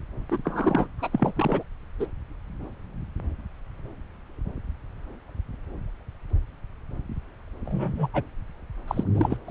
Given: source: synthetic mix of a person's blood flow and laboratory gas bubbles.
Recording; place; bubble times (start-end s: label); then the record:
Doppler ultrasound of blood flow; subclavian vein
0.31-0.38 s: bubbles
0.45-0.88 s: bubbles
0.98-1.09 s: bubbles
1.12-1.32 s: bubbles
1.36-1.63 s: bubbles
1.99-2.06 s: bubbles
7.66-8.08 s: bubbles
8.13-8.23 s: bubbles
8.88-9.04 s: bubbles
9.14-9.37 s: bubbles
9.47-9.50 s: bubbles
From the record:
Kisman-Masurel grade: 221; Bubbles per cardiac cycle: several, 3 to 8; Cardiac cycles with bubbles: 10 to 50%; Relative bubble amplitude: barely perceptible (0.100 to 0.250); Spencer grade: 2 (many but less than half of the cardiac periods contain bubble signals, singularly or in groups); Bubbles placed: anywhere in the cardiac cycle